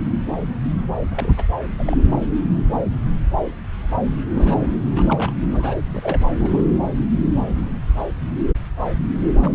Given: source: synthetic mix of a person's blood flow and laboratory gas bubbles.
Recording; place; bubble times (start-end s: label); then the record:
Doppler ultrasound of blood flow; subclavian vein
1.10-1.44 s: bubbles
1.65-1.74 s: bubbles
1.79-2.02 s: bubbles
4.32-4.73 s: bubbles
4.94-5.32 s: bubbles
5.50-5.75 s: bubbles
5.86-6.22 s: bubbles
6.37-6.63 s: bubbles
9.39-9.52 s: bubbles
From the record:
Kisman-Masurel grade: 332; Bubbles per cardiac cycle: rolling drumbeat, 9 or more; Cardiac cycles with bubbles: 50 to 99%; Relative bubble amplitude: moderate (0.250 to 0.450); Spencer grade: 3 (all of the cardiac periods contain showers or single bubble signals, but not dominating or overriding the cardiac motion signals); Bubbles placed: anywhere in the cardiac cycle